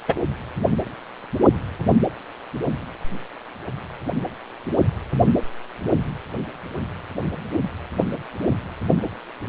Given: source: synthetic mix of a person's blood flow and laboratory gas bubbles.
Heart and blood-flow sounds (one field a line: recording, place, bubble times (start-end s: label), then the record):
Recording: Doppler ultrasound of blood flow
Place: precordium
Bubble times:
0.08-0.14 s: bubbles
From the record:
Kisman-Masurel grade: 213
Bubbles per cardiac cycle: several, 3 to 8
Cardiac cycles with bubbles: 1 to 10%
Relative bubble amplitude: loud (0.450 to 0.775)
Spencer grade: 1 (occasional bubble signal discernible with the cardiac motion signal, with majority of cardiac periods free of bubbles)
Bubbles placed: only in the low amplitude regions of the cardiac cycle